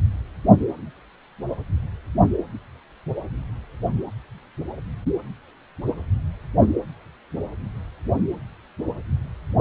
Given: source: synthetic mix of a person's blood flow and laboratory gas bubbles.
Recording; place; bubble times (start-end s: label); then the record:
Doppler ultrasound of blood flow; precordium
no bubbles
From the record:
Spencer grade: 0 (complete lack of bubble signals)